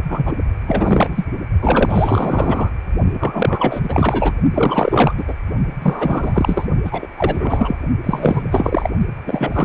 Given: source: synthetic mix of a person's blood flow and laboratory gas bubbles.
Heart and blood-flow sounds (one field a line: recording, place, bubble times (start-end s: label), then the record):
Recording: Doppler ultrasound of blood flow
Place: precordium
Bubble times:
0.08-0.34 s: bubbles
0.67-1.28 s: bubbles
1.61-2.70 s: bubbles
3.20-4.33 s: bubbles
4.54-5.14 s: bubbles
5.17-5.34 s: bubbles
5.82-6.67 s: bubbles
6.84-7.07 s: bubbles
7.17-7.77 s: bubbles
8.04-8.89 s: bubbles
9.26-9.64 s: bubbles
From the record:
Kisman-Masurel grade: 444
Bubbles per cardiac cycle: continuous sound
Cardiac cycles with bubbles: 100%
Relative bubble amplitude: maximal (0.775 to 0.999)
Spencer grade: 4 (maximum detectable bubble signal sounding continuously throughout systole and diastole of every cardiac period, and overriding the amplitude of the normal cardiac signals)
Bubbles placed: only in the low amplitude regions of the cardiac cycle